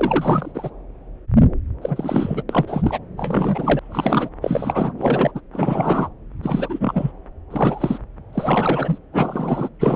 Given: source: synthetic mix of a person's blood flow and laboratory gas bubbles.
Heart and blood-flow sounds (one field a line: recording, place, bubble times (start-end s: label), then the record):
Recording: Doppler ultrasound of blood flow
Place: subclavian vein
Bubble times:
0.00-0.69 s: bubbles
1.81-2.43 s: bubbles
2.49-2.98 s: bubbles
3.17-4.29 s: bubbles
4.42-4.93 s: bubbles
4.98-5.32 s: bubbles
5.35-5.41 s: bubbles
5.53-6.09 s: bubbles
6.43-7.12 s: bubbles
7.50-7.99 s: bubbles
8.33-8.98 s: bubbles
9.12-9.69 s: bubbles
9.79-9.96 s: bubbles
From the record:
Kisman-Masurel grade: 333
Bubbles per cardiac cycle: rolling drumbeat, 9 or more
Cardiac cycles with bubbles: 50 to 99%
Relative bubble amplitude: loud (0.450 to 0.775)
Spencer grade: 3 (all of the cardiac periods contain showers or single bubble signals, but not dominating or overriding the cardiac motion signals)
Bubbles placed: anywhere in the cardiac cycle